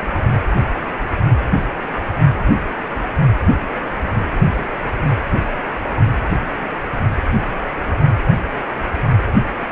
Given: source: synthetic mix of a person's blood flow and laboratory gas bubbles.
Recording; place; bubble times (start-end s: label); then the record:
Doppler ultrasound of blood flow; precordium
6.29-6.34 s: bubbles
From the record:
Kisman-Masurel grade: 111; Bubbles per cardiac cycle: 1 to 2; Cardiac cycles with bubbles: 1 to 10%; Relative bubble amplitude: barely perceptible (0.100 to 0.250); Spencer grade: 1 (occasional bubble signal discernible with the cardiac motion signal, with majority of cardiac periods free of bubbles); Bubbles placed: anywhere in the cardiac cycle